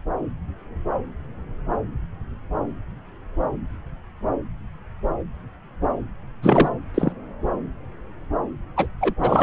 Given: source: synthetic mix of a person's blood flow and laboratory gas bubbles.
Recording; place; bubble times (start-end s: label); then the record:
Doppler ultrasound of blood flow; subclavian vein
6.42-6.69 s: bubbles
6.94-7.12 s: bubbles
8.76-8.87 s: bubbles
9.01-9.14 s: bubbles
9.21-9.42 s: bubbles
From the record:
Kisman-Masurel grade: 222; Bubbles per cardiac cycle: several, 3 to 8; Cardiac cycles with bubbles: 10 to 50%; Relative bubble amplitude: moderate (0.250 to 0.450); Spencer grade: 2 (many but less than half of the cardiac periods contain bubble signals, singularly or in groups); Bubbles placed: anywhere in the cardiac cycle